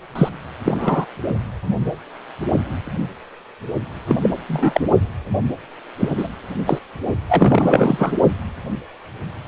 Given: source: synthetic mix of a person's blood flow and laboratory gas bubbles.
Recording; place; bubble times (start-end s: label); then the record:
Doppler ultrasound of blood flow; precordium
0.15-0.29 s: bubbles
0.65-1.05 s: bubbles
4.08-4.16 s: bubbles
4.22-4.29 s: bubbles
4.48-4.81 s: bubbles
5.98-6.08 s: bubbles
6.17-6.28 s: bubbles
6.66-6.79 s: bubbles
7.29-8.13 s: bubbles
From the record:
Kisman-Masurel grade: 233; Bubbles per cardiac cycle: several, 3 to 8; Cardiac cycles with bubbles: 50 to 99%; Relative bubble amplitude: loud (0.450 to 0.775); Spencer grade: 3 (all of the cardiac periods contain showers or single bubble signals, but not dominating or overriding the cardiac motion signals); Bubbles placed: only in the low amplitude regions of the cardiac cycle